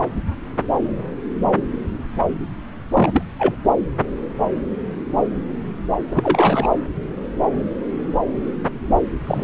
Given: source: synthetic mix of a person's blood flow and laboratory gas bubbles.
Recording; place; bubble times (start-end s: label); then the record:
Doppler ultrasound of blood flow; subclavian vein
2.93-3.11 s: bubbles
3.14-3.24 s: bubbles
3.39-3.56 s: bubbles
6.12-6.68 s: bubbles
9.27-9.44 s: bubbles
From the record:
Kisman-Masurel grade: 222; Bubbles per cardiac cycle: several, 3 to 8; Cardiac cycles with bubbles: 10 to 50%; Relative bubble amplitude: moderate (0.250 to 0.450); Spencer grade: 2 (many but less than half of the cardiac periods contain bubble signals, singularly or in groups); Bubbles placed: anywhere in the cardiac cycle